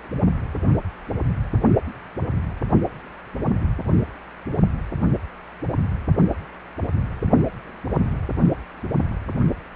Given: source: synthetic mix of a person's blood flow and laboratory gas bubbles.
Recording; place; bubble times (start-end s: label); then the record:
Doppler ultrasound of blood flow; precordium
no bubbles
From the record:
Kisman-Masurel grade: 000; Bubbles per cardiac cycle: 0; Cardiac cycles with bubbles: 0%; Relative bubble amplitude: no bubbles discernible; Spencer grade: 0 (complete lack of bubble signals)